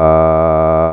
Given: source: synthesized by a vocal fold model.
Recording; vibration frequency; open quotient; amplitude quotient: sustained vowel; 80 Hz; 0.4; 1.3